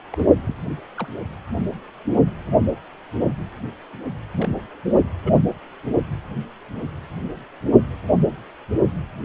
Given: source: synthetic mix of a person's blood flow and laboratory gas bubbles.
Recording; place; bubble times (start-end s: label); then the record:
Doppler ultrasound of blood flow; precordium
0.14-0.27 s: bubbles
0.46-0.55 s: bubbles
0.97-1.07 s: bubbles
4.38-4.49 s: bubbles
5.22-5.34 s: bubbles
6.75-6.82 s: bubbles
From the record:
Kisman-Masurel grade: 121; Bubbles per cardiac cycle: 1 to 2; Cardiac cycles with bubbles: 10 to 50%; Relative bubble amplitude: barely perceptible (0.100 to 0.250); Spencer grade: 2 (many but less than half of the cardiac periods contain bubble signals, singularly or in groups); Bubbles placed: only in the low amplitude regions of the cardiac cycle